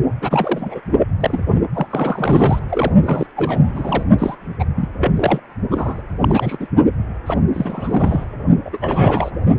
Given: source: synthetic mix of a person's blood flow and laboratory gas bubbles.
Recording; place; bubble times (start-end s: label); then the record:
Doppler ultrasound of blood flow; precordium
0.22-0.80 s: bubbles
1.20-1.43 s: bubbles
1.74-1.86 s: bubbles
1.90-2.60 s: bubbles
2.69-2.93 s: bubbles
3.03-3.27 s: bubbles
3.36-4.04 s: bubbles
4.18-4.35 s: bubbles
4.59-4.65 s: bubbles
4.75-4.88 s: bubbles
5.00-5.12 s: bubbles
5.16-5.40 s: bubbles
5.71-6.02 s: bubbles
6.21-6.57 s: bubbles
6.60-6.67 s: bubbles
7.26-7.40 s: bubbles
7.53-8.25 s: bubbles
8.65-8.70 s: bubbles
8.72-8.78 s: bubbles
8.80-9.30 s: bubbles
From the record:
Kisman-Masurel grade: 342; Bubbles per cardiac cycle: rolling drumbeat, 9 or more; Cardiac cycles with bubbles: 100%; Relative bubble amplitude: moderate (0.250 to 0.450); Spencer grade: 3 (all of the cardiac periods contain showers or single bubble signals, but not dominating or overriding the cardiac motion signals); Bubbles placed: only in the low amplitude regions of the cardiac cycle